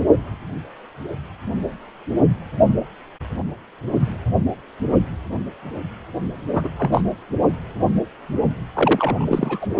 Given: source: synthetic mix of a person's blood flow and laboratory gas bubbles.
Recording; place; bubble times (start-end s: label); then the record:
Doppler ultrasound of blood flow; precordium
6.53-6.70 s: bubbles
6.78-7.03 s: bubbles
8.73-9.66 s: bubbles
From the record:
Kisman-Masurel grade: 222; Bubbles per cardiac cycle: several, 3 to 8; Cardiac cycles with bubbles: 10 to 50%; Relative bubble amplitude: moderate (0.250 to 0.450); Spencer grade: 2 (many but less than half of the cardiac periods contain bubble signals, singularly or in groups); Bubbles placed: only in the low amplitude regions of the cardiac cycle